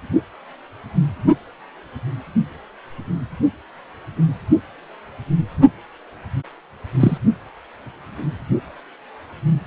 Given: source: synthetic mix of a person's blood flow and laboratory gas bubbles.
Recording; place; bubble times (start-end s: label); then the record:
Doppler ultrasound of blood flow; precordium
7.00-7.18 s: bubbles
From the record:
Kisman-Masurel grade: 113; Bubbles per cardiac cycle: 1 to 2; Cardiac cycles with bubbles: 1 to 10%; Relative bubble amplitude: loud (0.450 to 0.775); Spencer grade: 1 (occasional bubble signal discernible with the cardiac motion signal, with majority of cardiac periods free of bubbles); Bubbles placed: only in the low amplitude regions of the cardiac cycle